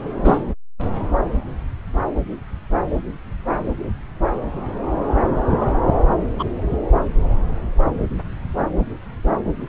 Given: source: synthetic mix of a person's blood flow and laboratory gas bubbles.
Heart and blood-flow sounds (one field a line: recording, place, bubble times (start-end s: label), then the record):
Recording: Doppler ultrasound of blood flow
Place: subclavian vein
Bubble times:
0.23-0.40 s: bubbles
5.51-5.78 s: bubbles
6.39-6.44 s: bubbles
From the record:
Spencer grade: 2 (many but less than half of the cardiac periods contain bubble signals, singularly or in groups)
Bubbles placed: anywhere in the cardiac cycle